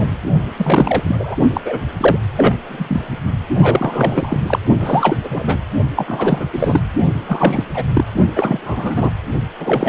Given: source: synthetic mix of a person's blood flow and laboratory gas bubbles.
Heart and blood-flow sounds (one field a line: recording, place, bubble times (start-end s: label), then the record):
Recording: Doppler ultrasound of blood flow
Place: precordium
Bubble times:
0.00-0.10 s: bubbles
0.57-1.36 s: bubbles
1.53-1.61 s: bubbles
1.65-1.81 s: bubbles
1.97-2.18 s: bubbles
2.37-2.56 s: bubbles
2.66-3.20 s: bubbles
3.58-4.41 s: bubbles
4.46-4.59 s: bubbles
4.80-5.17 s: bubbles
5.24-5.58 s: bubbles
5.96-6.48 s: bubbles
6.53-6.81 s: bubbles
7.29-7.63 s: bubbles
7.74-7.83 s: bubbles
7.93-8.04 s: bubbles
8.35-8.59 s: bubbles
8.62-9.12 s: bubbles
9.58-9.89 s: bubbles
From the record:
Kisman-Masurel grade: 343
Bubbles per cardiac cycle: rolling drumbeat, 9 or more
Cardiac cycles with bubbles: 100%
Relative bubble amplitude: loud (0.450 to 0.775)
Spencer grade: 3 (all of the cardiac periods contain showers or single bubble signals, but not dominating or overriding the cardiac motion signals)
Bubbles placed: only in the low amplitude regions of the cardiac cycle